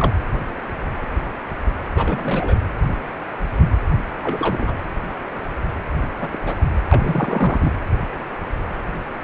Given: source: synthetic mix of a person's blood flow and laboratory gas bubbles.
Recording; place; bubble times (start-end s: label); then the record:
Doppler ultrasound of blood flow; precordium
0.00-0.12 s: bubbles
1.96-2.56 s: bubbles
4.23-4.75 s: bubbles
6.20-6.28 s: bubbles
6.30-6.38 s: bubbles
6.46-6.55 s: bubbles
6.91-7.71 s: bubbles
From the record:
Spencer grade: 2 (many but less than half of the cardiac periods contain bubble signals, singularly or in groups); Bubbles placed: anywhere in the cardiac cycle